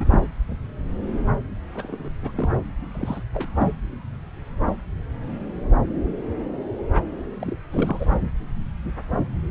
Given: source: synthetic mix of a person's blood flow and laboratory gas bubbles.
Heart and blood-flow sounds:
Doppler ultrasound of blood flow; subclavian vein
0.00-0.19 s: bubbles
1.75-2.10 s: bubbles
2.22-2.32 s: bubbles
2.35-2.49 s: bubbles
2.94-3.23 s: bubbles
3.33-3.50 s: bubbles
3.58-3.71 s: bubbles
7.40-7.58 s: bubbles
7.72-8.15 s: bubbles
9.10-9.28 s: bubbles
From the record:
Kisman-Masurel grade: 221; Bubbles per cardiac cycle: several, 3 to 8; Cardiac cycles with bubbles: 10 to 50%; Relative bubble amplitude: barely perceptible (0.100 to 0.250); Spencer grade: 2 (many but less than half of the cardiac periods contain bubble signals, singularly or in groups); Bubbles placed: anywhere in the cardiac cycle

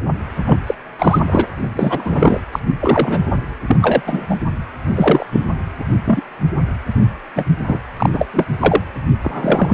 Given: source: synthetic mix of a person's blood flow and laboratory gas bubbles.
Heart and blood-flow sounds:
Doppler ultrasound of blood flow; precordium
0.45-0.74 s: bubbles
0.98-1.19 s: bubbles
1.27-1.46 s: bubbles
1.58-2.40 s: bubbles
2.52-2.59 s: bubbles
2.79-3.19 s: bubbles
3.67-3.77 s: bubbles
3.81-4.02 s: bubbles
4.06-4.26 s: bubbles
4.29-4.36 s: bubbles
4.96-5.26 s: bubbles
5.31-5.46 s: bubbles
5.81-5.85 s: bubbles
6.05-6.22 s: bubbles
7.35-7.45 s: bubbles
7.59-7.79 s: bubbles
7.96-8.10 s: bubbles
8.12-8.27 s: bubbles
8.33-8.45 s: bubbles
8.60-8.81 s: bubbles
9.22-9.74 s: bubbles
From the record:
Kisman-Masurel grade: 243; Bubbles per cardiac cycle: several, 3 to 8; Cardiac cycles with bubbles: 100%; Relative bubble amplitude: loud (0.450 to 0.775); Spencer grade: 3 (all of the cardiac periods contain showers or single bubble signals, but not dominating or overriding the cardiac motion signals); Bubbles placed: anywhere in the cardiac cycle

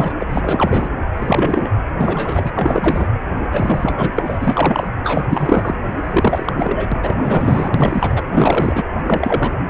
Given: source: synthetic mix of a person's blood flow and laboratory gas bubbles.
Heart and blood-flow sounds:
Doppler ultrasound of blood flow; precordium
0.00-0.13 s: bubbles
0.19-0.26 s: bubbles
0.29-0.88 s: bubbles
1.15-1.70 s: bubbles
2.00-2.51 s: bubbles
2.55-3.07 s: bubbles
3.51-4.11 s: bubbles
4.17-4.22 s: bubbles
4.26-4.90 s: bubbles
5.04-5.25 s: bubbles
5.29-5.75 s: bubbles
5.95-6.52 s: bubbles
6.56-6.88 s: bubbles
6.92-7.70 s: bubbles
7.74-8.22 s: bubbles
8.31-8.84 s: bubbles
8.97-9.58 s: bubbles
From the record:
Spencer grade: 3 (all of the cardiac periods contain showers or single bubble signals, but not dominating or overriding the cardiac motion signals); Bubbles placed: anywhere in the cardiac cycle

